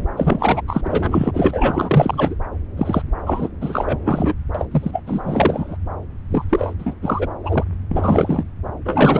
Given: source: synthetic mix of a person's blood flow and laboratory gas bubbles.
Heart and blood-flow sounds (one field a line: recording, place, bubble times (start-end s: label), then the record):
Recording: Doppler ultrasound of blood flow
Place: subclavian vein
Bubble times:
0.17-0.61 s: bubbles
0.68-1.31 s: bubbles
1.33-2.35 s: bubbles
2.76-3.02 s: bubbles
3.26-3.49 s: bubbles
3.61-3.99 s: bubbles
4.04-4.33 s: bubbles
4.54-4.65 s: bubbles
4.71-5.03 s: bubbles
5.06-5.78 s: bubbles
6.31-6.45 s: bubbles
6.49-6.73 s: bubbles
6.79-6.95 s: bubbles
7.02-7.28 s: bubbles
7.44-7.64 s: bubbles
7.91-8.44 s: bubbles
8.85-9.20 s: bubbles
From the record:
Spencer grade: 4 (maximum detectable bubble signal sounding continuously throughout systole and diastole of every cardiac period, and overriding the amplitude of the normal cardiac signals)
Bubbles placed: anywhere in the cardiac cycle